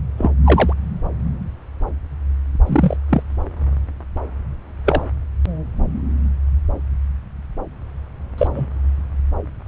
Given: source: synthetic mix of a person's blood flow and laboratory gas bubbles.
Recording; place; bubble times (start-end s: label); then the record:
Doppler ultrasound of blood flow; subclavian vein
0.17-0.31 s: bubbles
0.44-0.73 s: bubbles
2.66-2.97 s: bubbles
3.09-3.23 s: bubbles
4.85-5.02 s: bubbles
8.38-8.47 s: bubbles
8.55-8.68 s: bubbles
From the record:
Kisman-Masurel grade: 123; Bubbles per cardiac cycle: 1 to 2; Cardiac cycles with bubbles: 10 to 50%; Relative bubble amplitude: loud (0.450 to 0.775); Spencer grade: 2 (many but less than half of the cardiac periods contain bubble signals, singularly or in groups); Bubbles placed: anywhere in the cardiac cycle